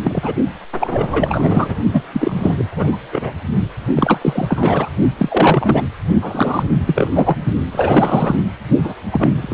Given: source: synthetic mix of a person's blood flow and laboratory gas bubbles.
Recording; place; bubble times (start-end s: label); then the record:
Doppler ultrasound of blood flow; precordium
0.03-0.34 s: bubbles
0.80-1.76 s: bubbles
1.93-2.02 s: bubbles
2.12-2.55 s: bubbles
2.58-2.98 s: bubbles
3.12-3.33 s: bubbles
3.96-4.90 s: bubbles
5.17-5.82 s: bubbles
6.21-6.63 s: bubbles
6.87-7.09 s: bubbles
7.13-7.37 s: bubbles
7.72-8.36 s: bubbles
8.83-8.93 s: bubbles
9.11-9.54 s: bubbles
From the record:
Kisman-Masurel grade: 343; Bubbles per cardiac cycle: rolling drumbeat, 9 or more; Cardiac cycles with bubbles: 100%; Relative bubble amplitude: loud (0.450 to 0.775); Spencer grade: 3 (all of the cardiac periods contain showers or single bubble signals, but not dominating or overriding the cardiac motion signals); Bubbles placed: only in the low amplitude regions of the cardiac cycle